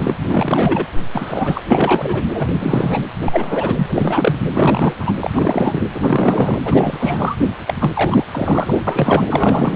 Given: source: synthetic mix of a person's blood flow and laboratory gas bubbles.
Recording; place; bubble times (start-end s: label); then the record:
Doppler ultrasound of blood flow; precordium
0.00-0.14 s: bubbles
0.29-0.86 s: bubbles
1.14-1.63 s: bubbles
1.70-2.23 s: bubbles
2.33-2.48 s: bubbles
2.51-3.02 s: bubbles
3.19-4.39 s: bubbles
4.53-5.14 s: bubbles
5.19-5.30 s: bubbles
5.33-5.85 s: bubbles
5.93-6.57 s: bubbles
6.62-7.36 s: bubbles
7.67-7.73 s: bubbles
7.80-7.90 s: bubbles
7.93-8.24 s: bubbles
8.31-8.80 s: bubbles
8.87-9.76 s: bubbles
From the record:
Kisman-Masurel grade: 343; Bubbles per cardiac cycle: rolling drumbeat, 9 or more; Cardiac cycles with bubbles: 100%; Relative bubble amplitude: loud (0.450 to 0.775); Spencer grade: 3 (all of the cardiac periods contain showers or single bubble signals, but not dominating or overriding the cardiac motion signals); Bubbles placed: anywhere in the cardiac cycle